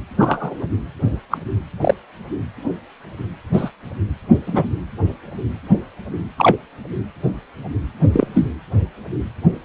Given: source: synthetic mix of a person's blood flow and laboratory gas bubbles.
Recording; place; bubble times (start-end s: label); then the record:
Doppler ultrasound of blood flow; precordium
0.18-0.67 s: bubbles
1.30-1.38 s: bubbles
1.81-1.94 s: bubbles
3.53-3.70 s: bubbles
4.46-4.70 s: bubbles
6.38-6.57 s: bubbles
8.12-8.27 s: bubbles
8.34-8.47 s: bubbles
From the record:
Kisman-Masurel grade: 123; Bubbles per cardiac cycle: 1 to 2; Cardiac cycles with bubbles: 10 to 50%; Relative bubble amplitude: loud (0.450 to 0.775); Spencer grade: 2 (many but less than half of the cardiac periods contain bubble signals, singularly or in groups); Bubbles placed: anywhere in the cardiac cycle